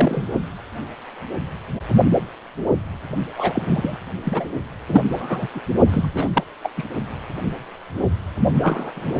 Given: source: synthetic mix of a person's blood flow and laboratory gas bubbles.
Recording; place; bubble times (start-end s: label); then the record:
Doppler ultrasound of blood flow; precordium
0.00-0.28 s: bubbles
3.37-3.98 s: bubbles
4.24-4.50 s: bubbles
4.88-5.04 s: bubbles
5.11-5.47 s: bubbles
5.54-5.60 s: bubbles
5.87-6.11 s: bubbles
6.14-6.29 s: bubbles
6.34-6.44 s: bubbles
6.62-6.70 s: bubbles
6.77-6.83 s: bubbles
8.54-8.92 s: bubbles
8.95-9.20 s: bubbles
From the record:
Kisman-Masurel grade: 232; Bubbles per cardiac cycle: several, 3 to 8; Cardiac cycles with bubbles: 50 to 99%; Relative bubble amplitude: moderate (0.250 to 0.450); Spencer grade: 3 (all of the cardiac periods contain showers or single bubble signals, but not dominating or overriding the cardiac motion signals); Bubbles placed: only in the low amplitude regions of the cardiac cycle